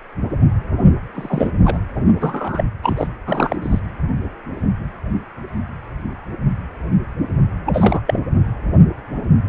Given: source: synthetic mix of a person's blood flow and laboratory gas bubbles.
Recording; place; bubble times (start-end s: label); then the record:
Doppler ultrasound of blood flow; precordium
1.15-1.48 s: bubbles
1.64-1.77 s: bubbles
2.19-2.64 s: bubbles
2.82-3.07 s: bubbles
3.27-3.56 s: bubbles
3.62-3.79 s: bubbles
7.66-8.01 s: bubbles
8.07-8.20 s: bubbles
From the record:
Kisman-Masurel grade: 222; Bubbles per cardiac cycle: several, 3 to 8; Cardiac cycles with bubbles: 10 to 50%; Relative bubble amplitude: moderate (0.250 to 0.450); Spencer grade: 2 (many but less than half of the cardiac periods contain bubble signals, singularly or in groups); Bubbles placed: anywhere in the cardiac cycle